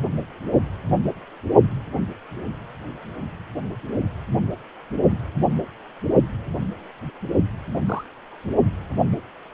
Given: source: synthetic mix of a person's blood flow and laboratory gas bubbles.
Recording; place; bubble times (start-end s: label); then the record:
Doppler ultrasound of blood flow; precordium
7.86-8.04 s: bubbles
From the record:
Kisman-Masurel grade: 121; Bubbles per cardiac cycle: 1 to 2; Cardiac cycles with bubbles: 10 to 50%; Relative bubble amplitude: barely perceptible (0.100 to 0.250); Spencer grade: 2 (many but less than half of the cardiac periods contain bubble signals, singularly or in groups); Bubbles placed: only in the low amplitude regions of the cardiac cycle